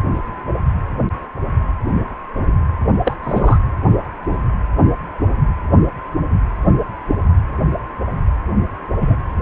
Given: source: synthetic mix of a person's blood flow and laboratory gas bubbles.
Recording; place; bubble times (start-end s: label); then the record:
Doppler ultrasound of blood flow; precordium
3.04-3.17 s: bubbles
3.23-3.58 s: bubbles
9.01-9.15 s: bubbles
From the record:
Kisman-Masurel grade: 123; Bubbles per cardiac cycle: 1 to 2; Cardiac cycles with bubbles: 10 to 50%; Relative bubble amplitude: loud (0.450 to 0.775); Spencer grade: 2 (many but less than half of the cardiac periods contain bubble signals, singularly or in groups); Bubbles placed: anywhere in the cardiac cycle